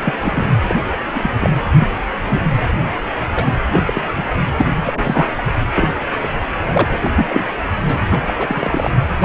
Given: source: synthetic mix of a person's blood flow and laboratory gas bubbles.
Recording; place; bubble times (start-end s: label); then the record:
Doppler ultrasound of blood flow; precordium
0.04-0.52 s: bubbles
0.67-0.75 s: bubbles
0.91-0.97 s: bubbles
1.15-1.30 s: bubbles
1.40-1.50 s: bubbles
1.77-1.88 s: bubbles
2.25-2.44 s: bubbles
3.34-3.54 s: bubbles
3.72-4.04 s: bubbles
4.16-4.25 s: bubbles
4.58-4.65 s: bubbles
4.85-5.29 s: bubbles
5.35-5.44 s: bubbles
5.75-5.94 s: bubbles
6.16-6.28 s: bubbles
6.68-6.89 s: bubbles
6.93-6.97 s: bubbles
7.03-7.11 s: bubbles
7.16-7.62 s: bubbles
7.87-7.97 s: bubbles
8.11-8.20 s: bubbles
8.27-8.33 s: bubbles
8.36-8.90 s: bubbles
9.20-9.25 s: bubbles
From the record:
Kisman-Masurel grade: 242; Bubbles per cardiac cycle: several, 3 to 8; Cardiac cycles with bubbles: 100%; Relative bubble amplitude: moderate (0.250 to 0.450); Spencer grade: 3 (all of the cardiac periods contain showers or single bubble signals, but not dominating or overriding the cardiac motion signals); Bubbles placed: anywhere in the cardiac cycle